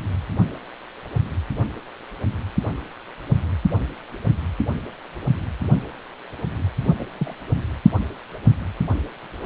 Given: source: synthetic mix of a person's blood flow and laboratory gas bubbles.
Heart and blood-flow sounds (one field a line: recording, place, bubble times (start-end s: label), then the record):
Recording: Doppler ultrasound of blood flow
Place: precordium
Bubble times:
6.99-7.04 s: bubbles
7.18-7.34 s: bubbles
From the record:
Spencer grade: 2 (many but less than half of the cardiac periods contain bubble signals, singularly or in groups)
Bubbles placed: only in the low amplitude regions of the cardiac cycle